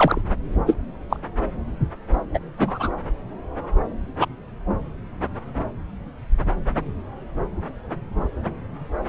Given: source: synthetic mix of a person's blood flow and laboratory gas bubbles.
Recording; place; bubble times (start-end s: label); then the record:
Doppler ultrasound of blood flow; subclavian vein
0.00-0.22 s: bubbles
0.67-0.75 s: bubbles
1.09-1.17 s: bubbles
2.34-2.40 s: bubbles
2.57-2.91 s: bubbles
4.21-4.26 s: bubbles
From the record:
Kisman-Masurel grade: 123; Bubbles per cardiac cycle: 1 to 2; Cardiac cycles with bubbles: 10 to 50%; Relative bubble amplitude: loud (0.450 to 0.775); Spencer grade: 2 (many but less than half of the cardiac periods contain bubble signals, singularly or in groups); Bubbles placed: anywhere in the cardiac cycle